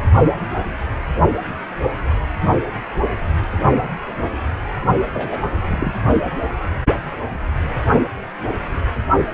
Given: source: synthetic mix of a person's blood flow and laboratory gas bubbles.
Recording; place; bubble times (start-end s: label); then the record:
Doppler ultrasound of blood flow; precordium
5.13-5.41 s: bubbles
5.65-5.94 s: bubbles
From the record:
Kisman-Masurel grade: 112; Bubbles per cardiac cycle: 1 to 2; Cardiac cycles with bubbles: 1 to 10%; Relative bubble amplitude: moderate (0.250 to 0.450); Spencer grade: 1 (occasional bubble signal discernible with the cardiac motion signal, with majority of cardiac periods free of bubbles); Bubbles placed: only in the low amplitude regions of the cardiac cycle